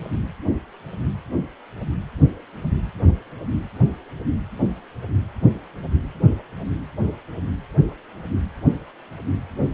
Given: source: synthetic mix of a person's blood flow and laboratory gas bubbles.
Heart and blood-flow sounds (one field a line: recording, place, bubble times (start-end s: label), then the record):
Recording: Doppler ultrasound of blood flow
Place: precordium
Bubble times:
no bubbles
From the record:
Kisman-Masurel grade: 000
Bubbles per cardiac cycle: 0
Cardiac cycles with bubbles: 0%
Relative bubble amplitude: no bubbles discernible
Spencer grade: 0 (complete lack of bubble signals)